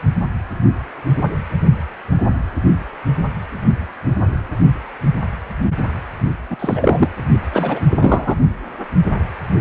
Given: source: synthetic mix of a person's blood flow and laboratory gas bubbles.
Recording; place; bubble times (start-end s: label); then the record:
Doppler ultrasound of blood flow; precordium
6.50-6.57 s: bubbles
6.59-7.08 s: bubbles
7.52-7.84 s: bubbles
7.90-8.37 s: bubbles
From the record:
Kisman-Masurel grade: 223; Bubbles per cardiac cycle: several, 3 to 8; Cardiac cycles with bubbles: 10 to 50%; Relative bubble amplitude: loud (0.450 to 0.775); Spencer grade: 2 (many but less than half of the cardiac periods contain bubble signals, singularly or in groups); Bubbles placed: only in the low amplitude regions of the cardiac cycle